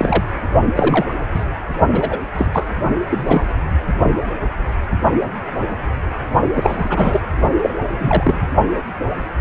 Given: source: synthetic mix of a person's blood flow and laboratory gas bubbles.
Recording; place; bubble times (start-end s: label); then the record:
Doppler ultrasound of blood flow; precordium
0.00-0.24 s: bubbles
0.71-1.13 s: bubbles
1.34-1.45 s: bubbles
1.92-2.18 s: bubbles
2.34-2.66 s: bubbles
3.08-3.55 s: bubbles
6.54-7.21 s: bubbles
7.62-7.75 s: bubbles
7.98-8.47 s: bubbles
From the record:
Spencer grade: 3 (all of the cardiac periods contain showers or single bubble signals, but not dominating or overriding the cardiac motion signals); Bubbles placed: only in the low amplitude regions of the cardiac cycle